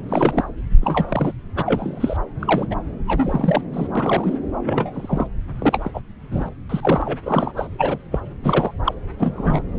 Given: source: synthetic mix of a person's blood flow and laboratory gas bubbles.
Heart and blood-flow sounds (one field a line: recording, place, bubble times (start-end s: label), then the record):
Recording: Doppler ultrasound of blood flow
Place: subclavian vein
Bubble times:
0.09-0.44 s: bubbles
0.82-1.32 s: bubbles
1.55-1.62 s: bubbles
1.66-2.17 s: bubbles
2.40-2.67 s: bubbles
2.71-2.75 s: bubbles
3.07-3.61 s: bubbles
3.73-3.87 s: bubbles
3.95-4.38 s: bubbles
4.66-5.27 s: bubbles
5.58-5.91 s: bubbles
5.93-6.01 s: bubbles
6.31-6.49 s: bubbles
6.69-7.18 s: bubbles
7.22-7.53 s: bubbles
7.56-7.67 s: bubbles
7.78-7.98 s: bubbles
8.12-8.20 s: bubbles
8.43-8.73 s: bubbles
8.85-8.95 s: bubbles
9.19-9.62 s: bubbles
From the record:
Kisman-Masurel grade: 232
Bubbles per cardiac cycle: several, 3 to 8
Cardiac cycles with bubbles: 50 to 99%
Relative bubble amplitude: moderate (0.250 to 0.450)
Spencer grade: 3 (all of the cardiac periods contain showers or single bubble signals, but not dominating or overriding the cardiac motion signals)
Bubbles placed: anywhere in the cardiac cycle